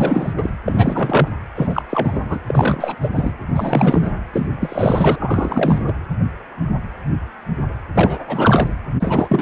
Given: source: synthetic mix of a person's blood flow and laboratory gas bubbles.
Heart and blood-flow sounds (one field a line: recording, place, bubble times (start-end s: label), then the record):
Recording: Doppler ultrasound of blood flow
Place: precordium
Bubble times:
0.00-0.32 s: bubbles
0.36-0.51 s: bubbles
0.66-1.28 s: bubbles
1.55-1.82 s: bubbles
1.90-2.39 s: bubbles
2.48-2.96 s: bubbles
3.01-3.10 s: bubbles
3.15-3.33 s: bubbles
3.56-4.12 s: bubbles
4.33-4.48 s: bubbles
4.61-5.83 s: bubbles
5.87-5.93 s: bubbles
7.95-8.23 s: bubbles
8.28-8.69 s: bubbles
9.00-9.41 s: bubbles
From the record:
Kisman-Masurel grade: 333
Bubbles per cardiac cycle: rolling drumbeat, 9 or more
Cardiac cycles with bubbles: 50 to 99%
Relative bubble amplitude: loud (0.450 to 0.775)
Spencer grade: 3 (all of the cardiac periods contain showers or single bubble signals, but not dominating or overriding the cardiac motion signals)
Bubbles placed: anywhere in the cardiac cycle